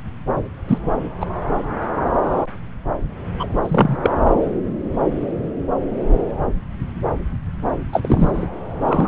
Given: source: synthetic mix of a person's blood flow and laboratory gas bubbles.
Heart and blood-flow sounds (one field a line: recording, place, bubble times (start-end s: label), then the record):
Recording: Doppler ultrasound of blood flow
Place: subclavian vein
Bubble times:
0.68-0.78 s: bubbles
1.21-1.26 s: bubbles
3.39-3.48 s: bubbles
3.61-3.97 s: bubbles
4.03-4.11 s: bubbles
7.93-8.47 s: bubbles
8.81-9.08 s: bubbles
From the record:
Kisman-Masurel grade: 223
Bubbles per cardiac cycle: several, 3 to 8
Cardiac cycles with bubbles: 10 to 50%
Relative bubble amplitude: loud (0.450 to 0.775)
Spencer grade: 2 (many but less than half of the cardiac periods contain bubble signals, singularly or in groups)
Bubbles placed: anywhere in the cardiac cycle